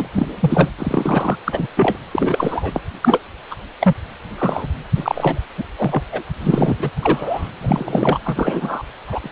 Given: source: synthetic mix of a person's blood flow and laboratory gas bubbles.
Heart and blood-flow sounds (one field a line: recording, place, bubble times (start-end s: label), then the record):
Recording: Doppler ultrasound of blood flow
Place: precordium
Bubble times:
0.00-0.07 s: bubbles
0.12-0.27 s: bubbles
0.40-0.69 s: bubbles
0.79-1.37 s: bubbles
1.44-1.68 s: bubbles
1.76-1.99 s: bubbles
2.11-2.82 s: bubbles
3.02-3.19 s: bubbles
3.50-3.55 s: bubbles
3.80-3.95 s: bubbles
4.38-4.68 s: bubbles
4.95-5.39 s: bubbles
5.58-5.64 s: bubbles
5.76-6.02 s: bubbles
6.12-6.23 s: bubbles
6.39-6.76 s: bubbles
6.79-6.89 s: bubbles
7.01-7.48 s: bubbles
7.61-8.20 s: bubbles
8.24-8.83 s: bubbles
9.07-9.32 s: bubbles
From the record:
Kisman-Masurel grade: 243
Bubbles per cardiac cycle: several, 3 to 8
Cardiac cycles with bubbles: 100%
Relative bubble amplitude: loud (0.450 to 0.775)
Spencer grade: 3 (all of the cardiac periods contain showers or single bubble signals, but not dominating or overriding the cardiac motion signals)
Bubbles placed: anywhere in the cardiac cycle